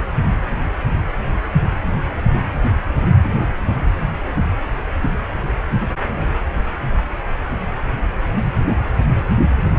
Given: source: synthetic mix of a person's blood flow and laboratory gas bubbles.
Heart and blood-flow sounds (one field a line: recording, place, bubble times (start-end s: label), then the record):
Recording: Doppler ultrasound of blood flow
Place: precordium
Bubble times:
no bubbles
From the record:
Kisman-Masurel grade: 000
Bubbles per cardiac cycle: 0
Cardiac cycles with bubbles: 0%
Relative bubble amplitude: no bubbles discernible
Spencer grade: 0 (complete lack of bubble signals)